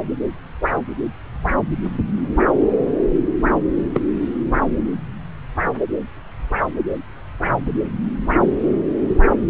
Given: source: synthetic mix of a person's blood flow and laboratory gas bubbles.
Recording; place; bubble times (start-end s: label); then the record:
Doppler ultrasound of blood flow; subclavian vein
3.94-4.00 s: bubbles
From the record:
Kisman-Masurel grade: 123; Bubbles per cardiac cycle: 1 to 2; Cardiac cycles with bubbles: 10 to 50%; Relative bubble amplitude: loud (0.450 to 0.775); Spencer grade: 2 (many but less than half of the cardiac periods contain bubble signals, singularly or in groups); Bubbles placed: anywhere in the cardiac cycle